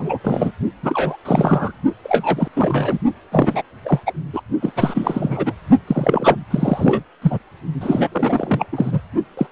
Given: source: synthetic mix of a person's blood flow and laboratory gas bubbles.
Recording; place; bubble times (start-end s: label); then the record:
Doppler ultrasound of blood flow; precordium
0.00-0.17 s: bubbles
0.23-0.51 s: bubbles
0.82-1.17 s: bubbles
1.25-1.72 s: bubbles
2.04-2.48 s: bubbles
2.55-2.99 s: bubbles
3.31-3.62 s: bubbles
3.84-4.00 s: bubbles
4.06-4.12 s: bubbles
4.33-4.42 s: bubbles
4.62-4.72 s: bubbles
4.76-5.53 s: bubbles
5.87-6.44 s: bubbles
6.50-7.03 s: bubbles
7.21-7.38 s: bubbles
7.80-8.09 s: bubbles
8.12-8.66 s: bubbles
8.72-9.01 s: bubbles
9.37-9.46 s: bubbles
From the record:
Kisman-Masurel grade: 343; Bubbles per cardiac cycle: rolling drumbeat, 9 or more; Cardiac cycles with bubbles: 100%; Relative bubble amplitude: loud (0.450 to 0.775); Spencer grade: 3 (all of the cardiac periods contain showers or single bubble signals, but not dominating or overriding the cardiac motion signals); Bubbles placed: only in the low amplitude regions of the cardiac cycle